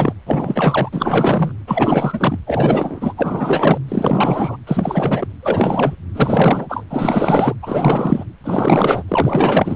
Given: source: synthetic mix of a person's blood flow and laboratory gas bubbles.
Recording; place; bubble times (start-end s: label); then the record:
Doppler ultrasound of blood flow; precordium
0.00-0.13 s: bubbles
0.27-0.90 s: bubbles
0.93-1.53 s: bubbles
1.67-2.38 s: bubbles
2.46-3.13 s: bubbles
3.16-3.78 s: bubbles
3.88-4.57 s: bubbles
4.67-5.27 s: bubbles
5.42-5.95 s: bubbles
6.14-6.83 s: bubbles
6.90-7.54 s: bubbles
7.62-8.24 s: bubbles
8.44-9.03 s: bubbles
9.08-9.76 s: bubbles
From the record:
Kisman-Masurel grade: 444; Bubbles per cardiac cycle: continuous sound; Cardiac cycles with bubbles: 100%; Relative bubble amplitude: maximal (0.775 to 0.999); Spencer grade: 4 (maximum detectable bubble signal sounding continuously throughout systole and diastole of every cardiac period, and overriding the amplitude of the normal cardiac signals); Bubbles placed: anywhere in the cardiac cycle